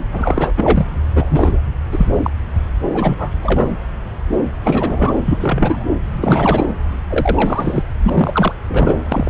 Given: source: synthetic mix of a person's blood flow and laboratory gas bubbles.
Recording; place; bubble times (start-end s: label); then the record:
Doppler ultrasound of blood flow; subclavian vein
0.12-0.52 s: bubbles
0.57-0.86 s: bubbles
1.15-1.60 s: bubbles
1.91-2.07 s: bubbles
2.22-2.30 s: bubbles
2.93-3.31 s: bubbles
3.42-3.71 s: bubbles
4.63-5.14 s: bubbles
5.25-5.38 s: bubbles
5.40-5.84 s: bubbles
6.09-6.66 s: bubbles
7.09-7.83 s: bubbles
8.03-8.53 s: bubbles
8.69-9.02 s: bubbles
9.12-9.30 s: bubbles
From the record:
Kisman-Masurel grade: 333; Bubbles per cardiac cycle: rolling drumbeat, 9 or more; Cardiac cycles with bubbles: 50 to 99%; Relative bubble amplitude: loud (0.450 to 0.775); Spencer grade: 3 (all of the cardiac periods contain showers or single bubble signals, but not dominating or overriding the cardiac motion signals); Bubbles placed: anywhere in the cardiac cycle